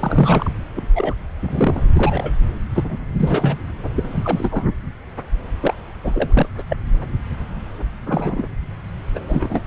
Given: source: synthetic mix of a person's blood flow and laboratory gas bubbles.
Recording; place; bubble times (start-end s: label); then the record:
Doppler ultrasound of blood flow; subclavian vein
0.00-0.51 s: bubbles
0.76-0.82 s: bubbles
0.95-1.15 s: bubbles
1.42-1.85 s: bubbles
1.95-2.33 s: bubbles
2.75-2.98 s: bubbles
3.20-3.58 s: bubbles
3.96-4.67 s: bubbles
5.60-5.74 s: bubbles
6.03-6.49 s: bubbles
6.57-6.63 s: bubbles
6.69-6.77 s: bubbles
8.06-8.47 s: bubbles
9.15-9.19 s: bubbles
9.27-9.60 s: bubbles
From the record:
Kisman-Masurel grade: 232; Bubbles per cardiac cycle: several, 3 to 8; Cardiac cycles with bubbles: 50 to 99%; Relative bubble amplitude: moderate (0.250 to 0.450); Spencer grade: 3 (all of the cardiac periods contain showers or single bubble signals, but not dominating or overriding the cardiac motion signals); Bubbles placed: anywhere in the cardiac cycle